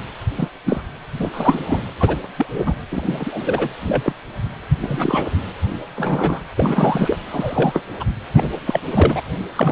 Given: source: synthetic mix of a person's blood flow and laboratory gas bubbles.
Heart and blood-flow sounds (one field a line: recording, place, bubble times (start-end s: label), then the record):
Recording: Doppler ultrasound of blood flow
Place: precordium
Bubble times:
0.38-0.48 s: bubbles
0.66-0.81 s: bubbles
1.19-1.31 s: bubbles
1.33-1.79 s: bubbles
1.99-2.17 s: bubbles
2.36-2.46 s: bubbles
2.53-2.75 s: bubbles
2.91-3.69 s: bubbles
3.80-4.13 s: bubbles
4.83-5.36 s: bubbles
5.96-6.42 s: bubbles
6.57-7.17 s: bubbles
7.31-7.83 s: bubbles
8.00-8.04 s: bubbles
8.34-8.61 s: bubbles
8.66-8.80 s: bubbles
8.93-9.21 s: bubbles
9.54-9.72 s: bubbles
From the record:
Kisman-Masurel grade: 242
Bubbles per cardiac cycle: several, 3 to 8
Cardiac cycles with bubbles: 100%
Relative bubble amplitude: moderate (0.250 to 0.450)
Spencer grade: 3 (all of the cardiac periods contain showers or single bubble signals, but not dominating or overriding the cardiac motion signals)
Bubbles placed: anywhere in the cardiac cycle